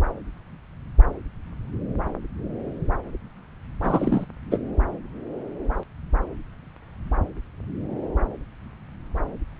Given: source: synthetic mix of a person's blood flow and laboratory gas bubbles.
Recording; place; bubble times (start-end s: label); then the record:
Doppler ultrasound of blood flow; subclavian vein
3.82-4.25 s: bubbles
4.51-4.58 s: bubbles
From the record:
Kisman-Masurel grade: 213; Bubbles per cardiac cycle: several, 3 to 8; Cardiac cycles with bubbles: 1 to 10%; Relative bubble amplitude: loud (0.450 to 0.775); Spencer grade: 1 (occasional bubble signal discernible with the cardiac motion signal, with majority of cardiac periods free of bubbles); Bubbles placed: anywhere in the cardiac cycle